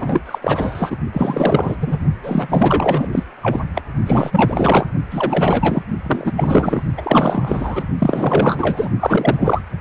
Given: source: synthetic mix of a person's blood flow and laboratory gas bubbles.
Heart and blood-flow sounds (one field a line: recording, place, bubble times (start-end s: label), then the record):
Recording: Doppler ultrasound of blood flow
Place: precordium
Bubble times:
0.00-0.23 s: bubbles
0.26-0.39 s: bubbles
0.42-0.96 s: bubbles
1.12-1.77 s: bubbles
1.80-1.97 s: bubbles
2.23-3.08 s: bubbles
3.12-3.24 s: bubbles
3.42-3.60 s: bubbles
3.75-3.81 s: bubbles
4.06-4.86 s: bubbles
5.10-5.83 s: bubbles
6.06-6.32 s: bubbles
6.36-6.82 s: bubbles
6.97-7.83 s: bubbles
7.98-8.90 s: bubbles
9.00-9.61 s: bubbles
From the record:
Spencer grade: 4 (maximum detectable bubble signal sounding continuously throughout systole and diastole of every cardiac period, and overriding the amplitude of the normal cardiac signals)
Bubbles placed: only in the low amplitude regions of the cardiac cycle